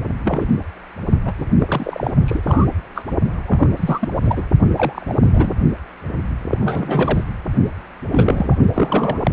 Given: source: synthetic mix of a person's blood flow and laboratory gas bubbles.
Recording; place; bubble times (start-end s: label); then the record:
Doppler ultrasound of blood flow; precordium
0.25-0.47 s: bubbles
1.25-1.32 s: bubbles
1.38-1.46 s: bubbles
1.60-2.11 s: bubbles
2.25-2.41 s: bubbles
2.46-2.66 s: bubbles
2.94-3.04 s: bubbles
3.47-3.67 s: bubbles
3.77-4.08 s: bubbles
4.21-4.45 s: bubbles
4.76-5.15 s: bubbles
5.23-5.53 s: bubbles
6.51-6.57 s: bubbles
6.60-7.24 s: bubbles
8.12-8.56 s: bubbles
8.74-9.31 s: bubbles
From the record:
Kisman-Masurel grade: 242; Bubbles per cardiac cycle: several, 3 to 8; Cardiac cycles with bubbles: 100%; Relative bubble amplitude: moderate (0.250 to 0.450); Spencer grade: 3 (all of the cardiac periods contain showers or single bubble signals, but not dominating or overriding the cardiac motion signals); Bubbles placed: only in the low amplitude regions of the cardiac cycle